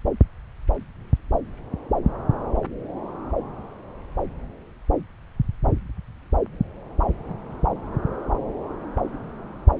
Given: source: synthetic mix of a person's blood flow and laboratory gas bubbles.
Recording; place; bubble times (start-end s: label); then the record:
Doppler ultrasound of blood flow; subclavian vein
no bubbles
From the record:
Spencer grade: 0 (complete lack of bubble signals)